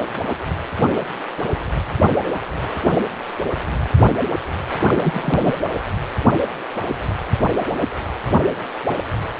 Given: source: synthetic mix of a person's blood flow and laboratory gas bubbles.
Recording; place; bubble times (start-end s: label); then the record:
Doppler ultrasound of blood flow; precordium
4.87-5.59 s: bubbles
From the record:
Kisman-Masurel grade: 213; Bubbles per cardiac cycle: several, 3 to 8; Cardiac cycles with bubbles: 1 to 10%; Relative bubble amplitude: loud (0.450 to 0.775); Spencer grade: 1 (occasional bubble signal discernible with the cardiac motion signal, with majority of cardiac periods free of bubbles); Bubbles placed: anywhere in the cardiac cycle